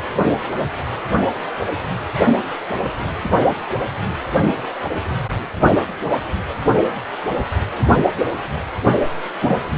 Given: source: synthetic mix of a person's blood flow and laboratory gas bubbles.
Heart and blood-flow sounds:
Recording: Doppler ultrasound of blood flow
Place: precordium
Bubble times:
9.42-9.56 s: bubbles
9.75-9.78 s: bubbles
From the record:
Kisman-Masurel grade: 223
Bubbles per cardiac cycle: several, 3 to 8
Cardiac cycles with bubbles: 10 to 50%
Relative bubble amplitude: loud (0.450 to 0.775)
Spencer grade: 2 (many but less than half of the cardiac periods contain bubble signals, singularly or in groups)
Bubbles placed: only in the low amplitude regions of the cardiac cycle

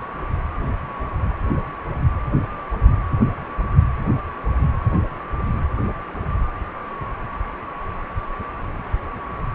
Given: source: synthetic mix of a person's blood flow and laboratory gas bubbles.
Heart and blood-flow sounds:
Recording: Doppler ultrasound of blood flow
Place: precordium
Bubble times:
no bubbles
From the record:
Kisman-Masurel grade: 000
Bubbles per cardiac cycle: 0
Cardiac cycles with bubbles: 0%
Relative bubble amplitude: no bubbles discernible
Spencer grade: 0 (complete lack of bubble signals)

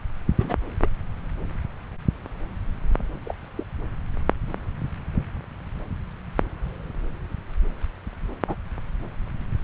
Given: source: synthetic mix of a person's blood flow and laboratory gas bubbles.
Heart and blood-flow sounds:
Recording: Doppler ultrasound of blood flow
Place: subclavian vein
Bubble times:
0.39-0.57 s: bubbles
0.81-0.88 s: bubbles
3.25-3.34 s: bubbles
3.57-3.63 s: bubbles
8.47-8.55 s: bubbles
9.59-9.64 s: bubbles
From the record:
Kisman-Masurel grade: 121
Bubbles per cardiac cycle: 1 to 2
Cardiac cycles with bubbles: 10 to 50%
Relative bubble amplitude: barely perceptible (0.100 to 0.250)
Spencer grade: 2 (many but less than half of the cardiac periods contain bubble signals, singularly or in groups)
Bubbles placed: anywhere in the cardiac cycle

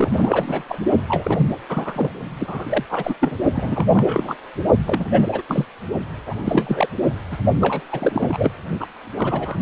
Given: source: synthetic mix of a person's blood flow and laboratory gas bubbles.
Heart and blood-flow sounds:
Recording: Doppler ultrasound of blood flow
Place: precordium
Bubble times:
0.00-0.64 s: bubbles
0.68-0.78 s: bubbles
1.06-1.47 s: bubbles
1.69-2.10 s: bubbles
2.40-2.83 s: bubbles
2.90-3.17 s: bubbles
3.20-3.36 s: bubbles
3.54-3.86 s: bubbles
3.93-4.35 s: bubbles
4.86-5.04 s: bubbles
5.11-5.29 s: bubbles
5.32-5.42 s: bubbles
5.48-5.65 s: bubbles
6.26-6.88 s: bubbles
7.31-7.38 s: bubbles
7.61-7.81 s: bubbles
7.91-8.51 s: bubbles
8.79-8.87 s: bubbles
9.17-9.62 s: bubbles
From the record:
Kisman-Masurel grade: 342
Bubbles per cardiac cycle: rolling drumbeat, 9 or more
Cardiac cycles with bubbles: 100%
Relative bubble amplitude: moderate (0.250 to 0.450)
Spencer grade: 3 (all of the cardiac periods contain showers or single bubble signals, but not dominating or overriding the cardiac motion signals)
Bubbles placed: only in the low amplitude regions of the cardiac cycle

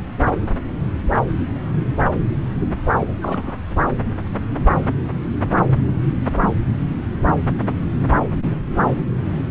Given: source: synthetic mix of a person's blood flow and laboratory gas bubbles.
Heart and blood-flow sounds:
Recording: Doppler ultrasound of blood flow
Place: subclavian vein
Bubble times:
2.99-3.57 s: bubbles
From the record:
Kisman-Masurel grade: 211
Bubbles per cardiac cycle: several, 3 to 8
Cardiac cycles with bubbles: 1 to 10%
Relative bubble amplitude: barely perceptible (0.100 to 0.250)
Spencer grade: 1 (occasional bubble signal discernible with the cardiac motion signal, with majority of cardiac periods free of bubbles)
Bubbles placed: anywhere in the cardiac cycle

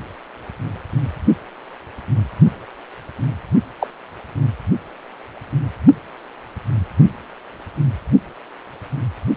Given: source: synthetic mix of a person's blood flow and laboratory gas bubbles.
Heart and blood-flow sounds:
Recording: Doppler ultrasound of blood flow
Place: precordium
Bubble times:
3.79-3.88 s: bubbles
From the record:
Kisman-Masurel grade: 113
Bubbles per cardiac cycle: 1 to 2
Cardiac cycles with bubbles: 1 to 10%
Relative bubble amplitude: loud (0.450 to 0.775)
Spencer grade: 1 (occasional bubble signal discernible with the cardiac motion signal, with majority of cardiac periods free of bubbles)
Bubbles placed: only in the low amplitude regions of the cardiac cycle

